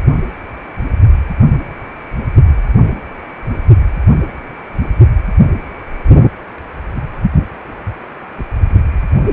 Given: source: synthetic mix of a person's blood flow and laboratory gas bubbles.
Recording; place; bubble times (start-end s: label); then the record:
Doppler ultrasound of blood flow; precordium
7.67-7.72 s: bubbles
From the record:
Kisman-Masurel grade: 111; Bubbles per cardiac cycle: 1 to 2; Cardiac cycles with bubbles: 1 to 10%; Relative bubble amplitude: barely perceptible (0.100 to 0.250); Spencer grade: 1 (occasional bubble signal discernible with the cardiac motion signal, with majority of cardiac periods free of bubbles); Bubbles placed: only in the low amplitude regions of the cardiac cycle